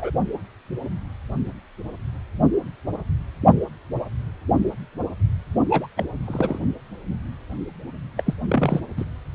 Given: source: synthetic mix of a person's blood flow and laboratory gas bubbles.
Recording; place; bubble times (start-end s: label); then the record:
Doppler ultrasound of blood flow; precordium
0.00-0.11 s: bubbles
5.70-5.87 s: bubbles
5.96-6.04 s: bubbles
6.27-6.59 s: bubbles
8.17-8.33 s: bubbles
8.48-8.80 s: bubbles
8.97-9.05 s: bubbles
From the record:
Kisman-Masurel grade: 222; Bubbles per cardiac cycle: several, 3 to 8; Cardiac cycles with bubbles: 10 to 50%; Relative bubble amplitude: moderate (0.250 to 0.450); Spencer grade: 2 (many but less than half of the cardiac periods contain bubble signals, singularly or in groups); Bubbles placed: only in the low amplitude regions of the cardiac cycle